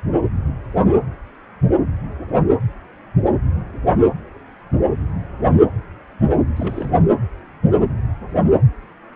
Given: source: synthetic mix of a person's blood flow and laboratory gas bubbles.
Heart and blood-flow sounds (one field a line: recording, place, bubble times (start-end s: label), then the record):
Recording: Doppler ultrasound of blood flow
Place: precordium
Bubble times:
6.56-7.04 s: bubbles
From the record:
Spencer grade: 1 (occasional bubble signal discernible with the cardiac motion signal, with majority of cardiac periods free of bubbles)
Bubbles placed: anywhere in the cardiac cycle